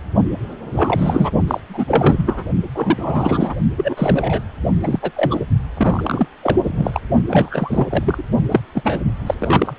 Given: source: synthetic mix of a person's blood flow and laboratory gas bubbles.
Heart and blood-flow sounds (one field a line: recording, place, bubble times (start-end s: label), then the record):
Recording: Doppler ultrasound of blood flow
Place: precordium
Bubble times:
0.71-1.32 s: bubbles
1.47-1.60 s: bubbles
1.69-1.85 s: bubbles
1.88-2.44 s: bubbles
2.75-3.55 s: bubbles
3.76-4.42 s: bubbles
4.81-5.11 s: bubbles
5.15-5.40 s: bubbles
5.73-6.29 s: bubbles
6.42-6.56 s: bubbles
6.63-7.01 s: bubbles
7.27-7.86 s: bubbles
7.90-8.23 s: bubbles
8.50-8.61 s: bubbles
8.74-8.99 s: bubbles
9.26-9.34 s: bubbles
9.38-9.73 s: bubbles
From the record:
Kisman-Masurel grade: 343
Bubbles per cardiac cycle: rolling drumbeat, 9 or more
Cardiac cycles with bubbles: 100%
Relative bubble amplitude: loud (0.450 to 0.775)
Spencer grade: 3 (all of the cardiac periods contain showers or single bubble signals, but not dominating or overriding the cardiac motion signals)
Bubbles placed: only in the low amplitude regions of the cardiac cycle